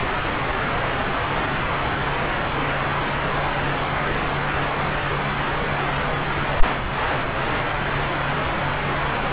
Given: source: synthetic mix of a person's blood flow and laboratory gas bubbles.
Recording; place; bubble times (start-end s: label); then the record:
Doppler ultrasound of blood flow; subclavian vein
no bubbles
From the record:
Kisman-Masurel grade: 000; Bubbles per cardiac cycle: 0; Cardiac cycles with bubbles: 0%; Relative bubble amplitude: no bubbles discernible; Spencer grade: 0 (complete lack of bubble signals)